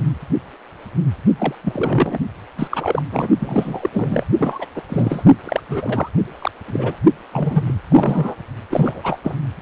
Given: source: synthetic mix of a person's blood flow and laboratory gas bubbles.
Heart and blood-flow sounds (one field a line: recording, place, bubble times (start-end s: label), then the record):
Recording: Doppler ultrasound of blood flow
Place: precordium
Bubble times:
1.38-1.55 s: bubbles
1.63-2.18 s: bubbles
2.57-2.67 s: bubbles
2.71-3.02 s: bubbles
3.11-3.28 s: bubbles
3.40-3.90 s: bubbles
3.92-4.24 s: bubbles
4.39-4.67 s: bubbles
4.75-4.82 s: bubbles
4.89-5.23 s: bubbles
5.44-5.61 s: bubbles
5.69-6.09 s: bubbles
6.39-6.51 s: bubbles
6.67-6.96 s: bubbles
7.32-7.75 s: bubbles
7.89-8.35 s: bubbles
8.69-9.19 s: bubbles
9.23-9.35 s: bubbles
From the record:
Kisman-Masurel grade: 333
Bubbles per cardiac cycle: rolling drumbeat, 9 or more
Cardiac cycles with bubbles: 50 to 99%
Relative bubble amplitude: loud (0.450 to 0.775)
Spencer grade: 3 (all of the cardiac periods contain showers or single bubble signals, but not dominating or overriding the cardiac motion signals)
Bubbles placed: only in the low amplitude regions of the cardiac cycle